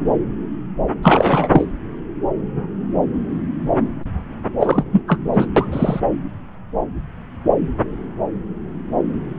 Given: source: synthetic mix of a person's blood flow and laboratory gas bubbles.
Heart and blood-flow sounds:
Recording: Doppler ultrasound of blood flow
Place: subclavian vein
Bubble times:
1.02-1.49 s: bubbles
1.51-1.65 s: bubbles
4.60-4.83 s: bubbles
4.92-5.02 s: bubbles
5.07-5.18 s: bubbles
5.33-5.46 s: bubbles
5.56-6.00 s: bubbles
From the record:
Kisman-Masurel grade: 223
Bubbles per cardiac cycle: several, 3 to 8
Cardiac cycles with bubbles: 10 to 50%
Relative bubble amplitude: loud (0.450 to 0.775)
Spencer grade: 2 (many but less than half of the cardiac periods contain bubble signals, singularly or in groups)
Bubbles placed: anywhere in the cardiac cycle

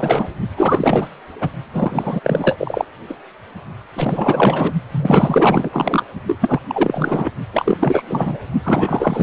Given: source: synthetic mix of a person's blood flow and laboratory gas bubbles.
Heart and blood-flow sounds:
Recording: Doppler ultrasound of blood flow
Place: precordium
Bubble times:
0.00-0.29 s: bubbles
0.57-1.09 s: bubbles
1.40-1.48 s: bubbles
1.72-2.20 s: bubbles
2.23-2.85 s: bubbles
3.08-3.16 s: bubbles
3.93-4.73 s: bubbles
4.92-5.69 s: bubbles
5.72-6.03 s: bubbles
6.26-6.60 s: bubbles
6.67-7.30 s: bubbles
7.53-8.02 s: bubbles
8.08-8.37 s: bubbles
8.63-9.23 s: bubbles
From the record:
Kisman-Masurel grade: 444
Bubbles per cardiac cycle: continuous sound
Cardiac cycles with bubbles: 100%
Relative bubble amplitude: maximal (0.775 to 0.999)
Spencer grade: 4 (maximum detectable bubble signal sounding continuously throughout systole and diastole of every cardiac period, and overriding the amplitude of the normal cardiac signals)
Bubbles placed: only in the low amplitude regions of the cardiac cycle

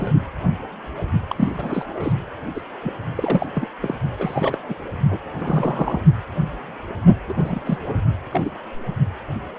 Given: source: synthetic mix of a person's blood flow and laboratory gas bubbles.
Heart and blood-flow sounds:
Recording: Doppler ultrasound of blood flow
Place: precordium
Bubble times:
0.00-0.12 s: bubbles
1.29-2.12 s: bubbles
2.54-2.61 s: bubbles
2.81-2.94 s: bubbles
3.16-3.47 s: bubbles
3.55-3.67 s: bubbles
3.81-3.94 s: bubbles
4.18-4.58 s: bubbles
4.68-4.75 s: bubbles
5.10-5.17 s: bubbles
5.38-6.00 s: bubbles
7.28-7.33 s: bubbles
7.38-7.61 s: bubbles
7.64-7.77 s: bubbles
7.86-7.94 s: bubbles
8.32-8.51 s: bubbles
From the record:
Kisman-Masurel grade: 332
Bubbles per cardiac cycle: rolling drumbeat, 9 or more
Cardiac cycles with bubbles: 50 to 99%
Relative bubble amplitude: moderate (0.250 to 0.450)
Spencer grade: 3 (all of the cardiac periods contain showers or single bubble signals, but not dominating or overriding the cardiac motion signals)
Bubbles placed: only in the low amplitude regions of the cardiac cycle

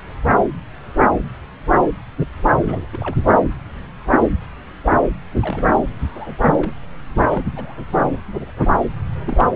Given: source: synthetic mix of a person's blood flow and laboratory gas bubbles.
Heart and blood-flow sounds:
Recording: Doppler ultrasound of blood flow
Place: subclavian vein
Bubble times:
2.56-2.85 s: bubbles
2.92-3.17 s: bubbles
5.40-5.72 s: bubbles
5.99-6.36 s: bubbles
6.55-6.75 s: bubbles
7.28-7.42 s: bubbles
7.56-7.77 s: bubbles
9.27-9.51 s: bubbles
From the record:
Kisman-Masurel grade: 221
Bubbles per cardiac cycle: several, 3 to 8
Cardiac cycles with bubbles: 10 to 50%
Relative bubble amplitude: barely perceptible (0.100 to 0.250)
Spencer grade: 2 (many but less than half of the cardiac periods contain bubble signals, singularly or in groups)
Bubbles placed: anywhere in the cardiac cycle

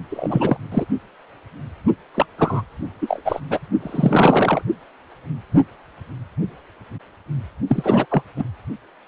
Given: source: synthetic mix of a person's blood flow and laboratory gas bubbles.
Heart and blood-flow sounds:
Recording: Doppler ultrasound of blood flow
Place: precordium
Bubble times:
0.10-0.57 s: bubbles
0.71-0.85 s: bubbles
2.15-2.26 s: bubbles
2.38-2.62 s: bubbles
3.01-3.22 s: bubbles
3.24-3.40 s: bubbles
3.49-3.59 s: bubbles
3.80-4.62 s: bubbles
7.67-8.06 s: bubbles
8.09-8.23 s: bubbles
8.36-8.43 s: bubbles
From the record:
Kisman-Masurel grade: 223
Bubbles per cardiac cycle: several, 3 to 8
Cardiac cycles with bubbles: 10 to 50%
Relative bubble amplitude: loud (0.450 to 0.775)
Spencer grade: 2 (many but less than half of the cardiac periods contain bubble signals, singularly or in groups)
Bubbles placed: only in the low amplitude regions of the cardiac cycle

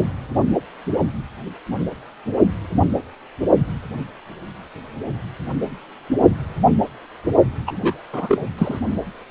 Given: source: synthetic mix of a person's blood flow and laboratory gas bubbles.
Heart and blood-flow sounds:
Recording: Doppler ultrasound of blood flow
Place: precordium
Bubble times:
7.67-7.94 s: bubbles
8.12-8.49 s: bubbles
8.57-8.79 s: bubbles
From the record:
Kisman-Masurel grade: 213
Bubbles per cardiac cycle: several, 3 to 8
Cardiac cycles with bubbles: 1 to 10%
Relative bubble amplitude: loud (0.450 to 0.775)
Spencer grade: 1 (occasional bubble signal discernible with the cardiac motion signal, with majority of cardiac periods free of bubbles)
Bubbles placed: only in the low amplitude regions of the cardiac cycle

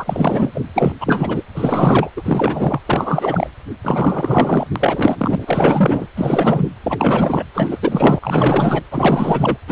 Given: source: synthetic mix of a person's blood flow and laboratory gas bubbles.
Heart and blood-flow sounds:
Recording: Doppler ultrasound of blood flow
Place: precordium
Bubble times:
0.00-0.51 s: bubbles
0.54-0.61 s: bubbles
0.75-0.93 s: bubbles
1.00-1.43 s: bubbles
1.54-2.10 s: bubbles
2.16-2.82 s: bubbles
2.86-3.50 s: bubbles
3.84-4.67 s: bubbles
4.76-6.07 s: bubbles
6.17-6.65 s: bubbles
6.84-7.43 s: bubbles
7.54-7.79 s: bubbles
7.82-8.83 s: bubbles
8.91-9.58 s: bubbles
9.68-9.72 s: bubbles
From the record:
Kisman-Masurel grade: 444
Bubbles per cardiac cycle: continuous sound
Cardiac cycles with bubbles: 100%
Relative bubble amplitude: maximal (0.775 to 0.999)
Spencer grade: 4 (maximum detectable bubble signal sounding continuously throughout systole and diastole of every cardiac period, and overriding the amplitude of the normal cardiac signals)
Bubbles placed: anywhere in the cardiac cycle

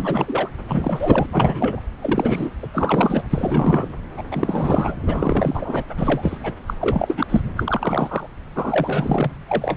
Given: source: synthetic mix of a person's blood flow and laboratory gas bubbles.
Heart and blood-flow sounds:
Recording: Doppler ultrasound of blood flow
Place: subclavian vein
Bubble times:
0.00-0.48 s: bubbles
0.67-1.26 s: bubbles
1.32-1.81 s: bubbles
1.98-2.50 s: bubbles
2.62-2.67 s: bubbles
2.73-3.23 s: bubbles
3.29-3.88 s: bubbles
4.17-4.23 s: bubbles
4.31-4.95 s: bubbles
5.07-5.85 s: bubbles
5.99-6.37 s: bubbles
6.43-6.53 s: bubbles
6.66-6.74 s: bubbles
6.81-7.27 s: bubbles
7.29-7.42 s: bubbles
7.57-8.27 s: bubbles
8.55-9.31 s: bubbles
9.48-9.77 s: bubbles
From the record:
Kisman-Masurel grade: 342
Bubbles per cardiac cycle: rolling drumbeat, 9 or more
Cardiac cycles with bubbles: 100%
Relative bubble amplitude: moderate (0.250 to 0.450)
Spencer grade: 3 (all of the cardiac periods contain showers or single bubble signals, but not dominating or overriding the cardiac motion signals)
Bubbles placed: anywhere in the cardiac cycle

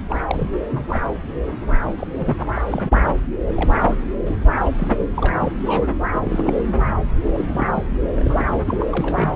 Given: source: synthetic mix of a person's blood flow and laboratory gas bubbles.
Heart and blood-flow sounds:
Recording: Doppler ultrasound of blood flow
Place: subclavian vein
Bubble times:
0.10-0.22 s: bubbles
0.27-0.51 s: bubbles
0.71-0.86 s: bubbles
0.88-0.99 s: bubbles
1.83-2.07 s: bubbles
2.19-2.44 s: bubbles
2.55-2.61 s: bubbles
2.64-2.98 s: bubbles
3.05-3.12 s: bubbles
3.55-3.72 s: bubbles
3.79-3.97 s: bubbles
4.26-4.39 s: bubbles
4.64-4.70 s: bubbles
4.79-4.88 s: bubbles
4.98-5.07 s: bubbles
5.16-5.35 s: bubbles
5.40-5.53 s: bubbles
5.65-5.88 s: bubbles
6.12-6.64 s: bubbles
7.25-7.68 s: bubbles
7.76-7.83 s: bubbles
8.17-8.45 s: bubbles
8.66-8.86 s: bubbles
8.91-9.33 s: bubbles
From the record:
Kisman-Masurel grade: 242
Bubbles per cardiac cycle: several, 3 to 8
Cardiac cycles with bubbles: 100%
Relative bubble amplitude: moderate (0.250 to 0.450)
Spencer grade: 3 (all of the cardiac periods contain showers or single bubble signals, but not dominating or overriding the cardiac motion signals)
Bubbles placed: anywhere in the cardiac cycle

